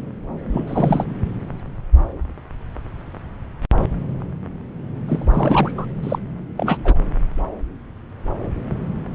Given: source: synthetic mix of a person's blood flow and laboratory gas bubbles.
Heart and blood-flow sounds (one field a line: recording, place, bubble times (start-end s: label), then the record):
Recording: Doppler ultrasound of blood flow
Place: subclavian vein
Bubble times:
0.51-0.65 s: bubbles
0.67-1.04 s: bubbles
5.08-5.24 s: bubbles
5.33-5.75 s: bubbles
5.78-5.86 s: bubbles
6.02-6.19 s: bubbles
6.57-6.77 s: bubbles
6.84-6.99 s: bubbles
From the record:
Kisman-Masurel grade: 222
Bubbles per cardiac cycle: several, 3 to 8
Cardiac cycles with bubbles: 10 to 50%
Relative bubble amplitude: moderate (0.250 to 0.450)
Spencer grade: 2 (many but less than half of the cardiac periods contain bubble signals, singularly or in groups)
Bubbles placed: anywhere in the cardiac cycle